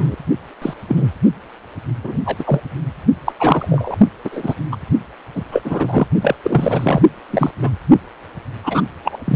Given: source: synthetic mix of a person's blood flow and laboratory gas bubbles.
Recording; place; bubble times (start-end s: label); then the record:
Doppler ultrasound of blood flow; precordium
0.00-0.15 s: bubbles
0.61-0.73 s: bubbles
0.88-1.09 s: bubbles
2.03-2.17 s: bubbles
2.25-2.36 s: bubbles
2.39-2.44 s: bubbles
2.46-2.60 s: bubbles
3.25-3.32 s: bubbles
3.39-3.98 s: bubbles
4.24-4.54 s: bubbles
4.71-4.76 s: bubbles
5.35-5.43 s: bubbles
5.51-6.07 s: bubbles
6.21-6.35 s: bubbles
6.42-7.01 s: bubbles
7.30-7.51 s: bubbles
7.61-7.69 s: bubbles
8.63-8.81 s: bubbles
9.03-9.36 s: bubbles
From the record:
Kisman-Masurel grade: 243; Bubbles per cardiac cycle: several, 3 to 8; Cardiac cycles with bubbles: 100%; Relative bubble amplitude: loud (0.450 to 0.775); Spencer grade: 3 (all of the cardiac periods contain showers or single bubble signals, but not dominating or overriding the cardiac motion signals); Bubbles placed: only in the low amplitude regions of the cardiac cycle